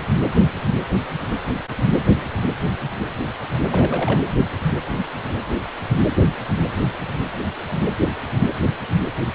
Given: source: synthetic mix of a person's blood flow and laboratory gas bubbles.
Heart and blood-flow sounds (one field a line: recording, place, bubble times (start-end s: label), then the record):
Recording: Doppler ultrasound of blood flow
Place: precordium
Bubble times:
3.68-4.21 s: bubbles
From the record:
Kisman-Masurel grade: 211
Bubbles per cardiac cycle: several, 3 to 8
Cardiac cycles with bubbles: 1 to 10%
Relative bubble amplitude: barely perceptible (0.100 to 0.250)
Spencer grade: 1 (occasional bubble signal discernible with the cardiac motion signal, with majority of cardiac periods free of bubbles)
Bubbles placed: anywhere in the cardiac cycle